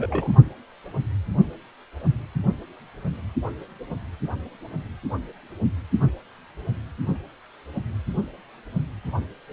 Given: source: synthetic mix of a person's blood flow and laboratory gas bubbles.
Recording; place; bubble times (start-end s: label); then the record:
Doppler ultrasound of blood flow; precordium
0.00-0.31 s: bubbles
From the record:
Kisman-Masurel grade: 111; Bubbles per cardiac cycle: 1 to 2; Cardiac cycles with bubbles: 1 to 10%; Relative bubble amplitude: barely perceptible (0.100 to 0.250); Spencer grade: 1 (occasional bubble signal discernible with the cardiac motion signal, with majority of cardiac periods free of bubbles); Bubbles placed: anywhere in the cardiac cycle